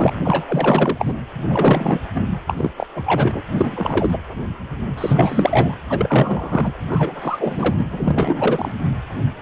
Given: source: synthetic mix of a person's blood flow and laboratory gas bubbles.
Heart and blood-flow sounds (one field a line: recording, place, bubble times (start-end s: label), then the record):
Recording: Doppler ultrasound of blood flow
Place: precordium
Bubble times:
0.00-0.14 s: bubbles
0.23-1.14 s: bubbles
1.49-2.00 s: bubbles
2.15-2.22 s: bubbles
2.47-2.70 s: bubbles
2.77-2.86 s: bubbles
2.94-3.03 s: bubbles
3.05-3.43 s: bubbles
3.53-4.17 s: bubbles
4.98-5.75 s: bubbles
5.90-6.72 s: bubbles
6.89-7.86 s: bubbles
7.91-8.71 s: bubbles
From the record:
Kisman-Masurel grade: 333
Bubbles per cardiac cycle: rolling drumbeat, 9 or more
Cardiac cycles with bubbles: 50 to 99%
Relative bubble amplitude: loud (0.450 to 0.775)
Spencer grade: 3 (all of the cardiac periods contain showers or single bubble signals, but not dominating or overriding the cardiac motion signals)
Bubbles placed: anywhere in the cardiac cycle